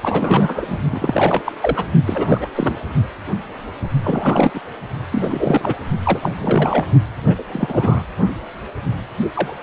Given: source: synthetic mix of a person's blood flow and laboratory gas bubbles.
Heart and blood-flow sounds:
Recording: Doppler ultrasound of blood flow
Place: precordium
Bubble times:
0.01-0.79 s: bubbles
0.91-1.52 s: bubbles
1.60-1.84 s: bubbles
2.06-2.49 s: bubbles
2.54-2.80 s: bubbles
4.03-4.51 s: bubbles
4.54-4.60 s: bubbles
5.11-5.75 s: bubbles
6.04-6.20 s: bubbles
6.22-6.31 s: bubbles
6.39-6.85 s: bubbles
7.23-7.34 s: bubbles
7.38-7.43 s: bubbles
7.52-8.03 s: bubbles
9.34-9.54 s: bubbles
9.61-9.63 s: bubbles
From the record:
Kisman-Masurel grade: 332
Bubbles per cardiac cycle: rolling drumbeat, 9 or more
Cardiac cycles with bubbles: 50 to 99%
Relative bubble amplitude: moderate (0.250 to 0.450)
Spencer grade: 3 (all of the cardiac periods contain showers or single bubble signals, but not dominating or overriding the cardiac motion signals)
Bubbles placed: only in the low amplitude regions of the cardiac cycle

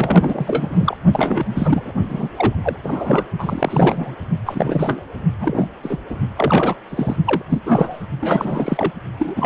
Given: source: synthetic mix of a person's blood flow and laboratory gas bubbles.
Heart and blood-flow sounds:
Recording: Doppler ultrasound of blood flow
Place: precordium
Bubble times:
0.00-0.97 s: bubbles
1.12-1.93 s: bubbles
2.08-2.29 s: bubbles
2.36-2.55 s: bubbles
2.62-2.76 s: bubbles
2.83-3.24 s: bubbles
3.38-4.14 s: bubbles
4.46-5.05 s: bubbles
5.40-5.69 s: bubbles
5.83-5.96 s: bubbles
6.09-6.18 s: bubbles
6.37-6.75 s: bubbles
6.89-7.16 s: bubbles
7.25-7.42 s: bubbles
7.49-7.60 s: bubbles
7.66-8.06 s: bubbles
8.21-8.92 s: bubbles
9.19-9.46 s: bubbles
From the record:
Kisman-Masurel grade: 342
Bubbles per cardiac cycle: rolling drumbeat, 9 or more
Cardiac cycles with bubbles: 100%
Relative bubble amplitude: moderate (0.250 to 0.450)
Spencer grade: 3 (all of the cardiac periods contain showers or single bubble signals, but not dominating or overriding the cardiac motion signals)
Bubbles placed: only in the low amplitude regions of the cardiac cycle

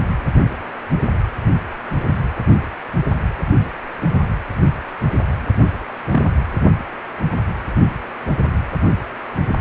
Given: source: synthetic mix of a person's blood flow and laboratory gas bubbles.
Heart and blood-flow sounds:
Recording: Doppler ultrasound of blood flow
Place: precordium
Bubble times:
6.11-6.23 s: bubbles
From the record:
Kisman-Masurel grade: 112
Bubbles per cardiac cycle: 1 to 2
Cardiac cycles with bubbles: 1 to 10%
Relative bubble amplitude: moderate (0.250 to 0.450)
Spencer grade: 1 (occasional bubble signal discernible with the cardiac motion signal, with majority of cardiac periods free of bubbles)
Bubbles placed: anywhere in the cardiac cycle

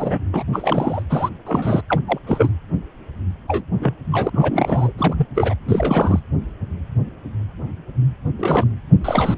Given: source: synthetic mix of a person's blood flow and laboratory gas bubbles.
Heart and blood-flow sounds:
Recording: Doppler ultrasound of blood flow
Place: precordium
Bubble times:
0.00-0.18 s: bubbles
0.33-0.43 s: bubbles
0.52-1.03 s: bubbles
1.09-1.29 s: bubbles
1.46-1.81 s: bubbles
1.89-2.00 s: bubbles
2.07-2.19 s: bubbles
2.26-2.50 s: bubbles
3.48-3.65 s: bubbles
3.80-3.94 s: bubbles
4.12-4.29 s: bubbles
4.32-4.92 s: bubbles
4.97-5.26 s: bubbles
5.35-5.54 s: bubbles
5.68-6.20 s: bubbles
8.38-8.67 s: bubbles
9.04-9.37 s: bubbles
From the record:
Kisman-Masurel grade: 232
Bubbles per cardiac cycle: several, 3 to 8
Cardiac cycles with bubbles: 50 to 99%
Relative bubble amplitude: moderate (0.250 to 0.450)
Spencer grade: 3 (all of the cardiac periods contain showers or single bubble signals, but not dominating or overriding the cardiac motion signals)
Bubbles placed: anywhere in the cardiac cycle

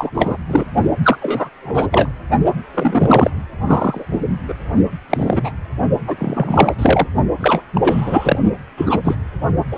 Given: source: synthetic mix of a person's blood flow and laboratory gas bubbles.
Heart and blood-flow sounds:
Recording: Doppler ultrasound of blood flow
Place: precordium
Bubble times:
0.00-0.10 s: bubbles
0.13-0.37 s: bubbles
0.48-0.65 s: bubbles
1.02-1.17 s: bubbles
1.21-1.49 s: bubbles
1.62-2.09 s: bubbles
2.74-3.30 s: bubbles
3.66-4.05 s: bubbles
4.11-4.21 s: bubbles
4.48-4.53 s: bubbles
5.10-5.52 s: bubbles
6.07-6.75 s: bubbles
6.79-7.06 s: bubbles
7.41-7.62 s: bubbles
7.74-8.39 s: bubbles
8.77-9.00 s: bubbles
9.04-9.14 s: bubbles
9.71-9.78 s: bubbles
From the record:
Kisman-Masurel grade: 243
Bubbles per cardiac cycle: several, 3 to 8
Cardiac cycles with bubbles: 100%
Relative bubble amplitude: loud (0.450 to 0.775)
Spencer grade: 3 (all of the cardiac periods contain showers or single bubble signals, but not dominating or overriding the cardiac motion signals)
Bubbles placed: only in the low amplitude regions of the cardiac cycle

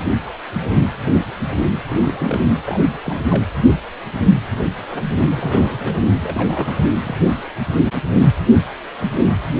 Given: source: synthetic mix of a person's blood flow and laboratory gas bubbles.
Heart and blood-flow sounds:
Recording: Doppler ultrasound of blood flow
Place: precordium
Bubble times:
1.85-2.40 s: bubbles
2.65-2.84 s: bubbles
3.03-3.19 s: bubbles
3.30-3.44 s: bubbles
4.77-4.85 s: bubbles
4.88-5.04 s: bubbles
5.30-5.99 s: bubbles
6.21-6.82 s: bubbles
7.04-7.19 s: bubbles
From the record:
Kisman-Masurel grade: 221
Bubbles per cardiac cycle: several, 3 to 8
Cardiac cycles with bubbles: 10 to 50%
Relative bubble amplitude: barely perceptible (0.100 to 0.250)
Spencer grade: 2 (many but less than half of the cardiac periods contain bubble signals, singularly or in groups)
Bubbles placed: anywhere in the cardiac cycle

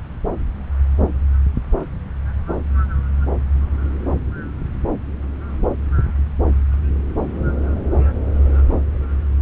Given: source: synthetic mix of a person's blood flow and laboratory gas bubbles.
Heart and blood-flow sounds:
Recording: Doppler ultrasound of blood flow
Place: subclavian vein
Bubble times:
no bubbles
From the record:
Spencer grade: 0 (complete lack of bubble signals)

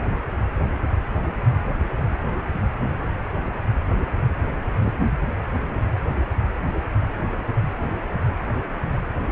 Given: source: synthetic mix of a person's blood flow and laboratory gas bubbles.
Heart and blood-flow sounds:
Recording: Doppler ultrasound of blood flow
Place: precordium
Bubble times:
4.83-4.93 s: bubbles
From the record:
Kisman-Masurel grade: 111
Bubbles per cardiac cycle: 1 to 2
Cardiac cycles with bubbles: 1 to 10%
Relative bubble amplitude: barely perceptible (0.100 to 0.250)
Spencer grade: 1 (occasional bubble signal discernible with the cardiac motion signal, with majority of cardiac periods free of bubbles)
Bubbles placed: anywhere in the cardiac cycle

